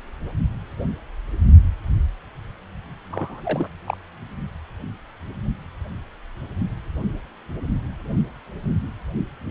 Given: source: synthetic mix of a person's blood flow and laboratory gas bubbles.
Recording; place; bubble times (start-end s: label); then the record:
Doppler ultrasound of blood flow; precordium
3.10-3.69 s: bubbles
3.86-3.97 s: bubbles
From the record:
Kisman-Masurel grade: 211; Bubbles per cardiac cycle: several, 3 to 8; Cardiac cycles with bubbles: 1 to 10%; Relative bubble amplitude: barely perceptible (0.100 to 0.250); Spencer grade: 1 (occasional bubble signal discernible with the cardiac motion signal, with majority of cardiac periods free of bubbles); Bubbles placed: only in the low amplitude regions of the cardiac cycle